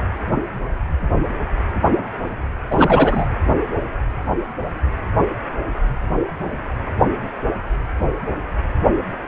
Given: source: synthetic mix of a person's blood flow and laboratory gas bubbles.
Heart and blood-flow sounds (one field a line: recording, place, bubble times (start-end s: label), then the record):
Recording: Doppler ultrasound of blood flow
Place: precordium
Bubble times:
2.71-3.27 s: bubbles
From the record:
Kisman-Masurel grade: 213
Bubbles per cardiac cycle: several, 3 to 8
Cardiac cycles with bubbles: 1 to 10%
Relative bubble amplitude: loud (0.450 to 0.775)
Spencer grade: 1 (occasional bubble signal discernible with the cardiac motion signal, with majority of cardiac periods free of bubbles)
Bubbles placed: anywhere in the cardiac cycle